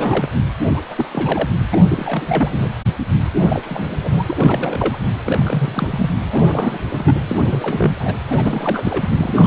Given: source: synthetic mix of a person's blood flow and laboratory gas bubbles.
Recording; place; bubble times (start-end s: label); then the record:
Doppler ultrasound of blood flow; precordium
0.00-0.28 s: bubbles
0.67-0.81 s: bubbles
0.91-1.06 s: bubbles
1.11-1.50 s: bubbles
1.72-1.78 s: bubbles
1.88-2.70 s: bubbles
3.37-3.96 s: bubbles
4.04-4.24 s: bubbles
4.27-4.96 s: bubbles
5.25-6.11 s: bubbles
6.31-6.78 s: bubbles
6.91-7.15 s: bubbles
7.27-8.16 s: bubbles
8.28-9.10 s: bubbles
9.17-9.47 s: bubbles
From the record:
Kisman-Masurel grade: 342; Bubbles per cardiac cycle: rolling drumbeat, 9 or more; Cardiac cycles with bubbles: 100%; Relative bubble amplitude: moderate (0.250 to 0.450); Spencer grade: 3 (all of the cardiac periods contain showers or single bubble signals, but not dominating or overriding the cardiac motion signals); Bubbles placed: anywhere in the cardiac cycle